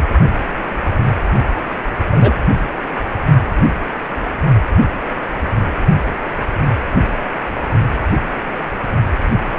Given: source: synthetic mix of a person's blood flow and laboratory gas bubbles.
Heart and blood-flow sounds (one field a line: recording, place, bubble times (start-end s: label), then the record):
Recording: Doppler ultrasound of blood flow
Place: precordium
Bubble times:
2.10-2.33 s: bubbles
From the record:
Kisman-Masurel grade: 113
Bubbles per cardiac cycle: 1 to 2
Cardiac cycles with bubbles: 1 to 10%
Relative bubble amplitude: loud (0.450 to 0.775)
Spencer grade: 1 (occasional bubble signal discernible with the cardiac motion signal, with majority of cardiac periods free of bubbles)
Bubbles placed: only in the low amplitude regions of the cardiac cycle